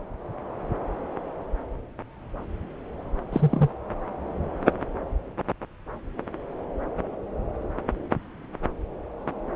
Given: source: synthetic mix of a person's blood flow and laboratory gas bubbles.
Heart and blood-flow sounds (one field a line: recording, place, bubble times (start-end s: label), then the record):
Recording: Doppler ultrasound of blood flow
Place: subclavian vein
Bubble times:
3.32-3.70 s: bubbles
From the record:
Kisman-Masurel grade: 112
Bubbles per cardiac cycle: 1 to 2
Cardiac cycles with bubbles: 1 to 10%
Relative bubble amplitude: moderate (0.250 to 0.450)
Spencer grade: 1 (occasional bubble signal discernible with the cardiac motion signal, with majority of cardiac periods free of bubbles)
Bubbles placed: anywhere in the cardiac cycle